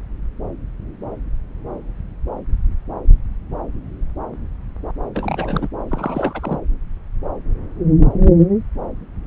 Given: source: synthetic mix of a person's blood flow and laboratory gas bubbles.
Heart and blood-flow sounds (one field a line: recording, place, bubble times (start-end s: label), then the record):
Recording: Doppler ultrasound of blood flow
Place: subclavian vein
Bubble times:
5.15-5.68 s: bubbles
5.88-6.59 s: bubbles
From the record:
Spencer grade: 1 (occasional bubble signal discernible with the cardiac motion signal, with majority of cardiac periods free of bubbles)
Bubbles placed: anywhere in the cardiac cycle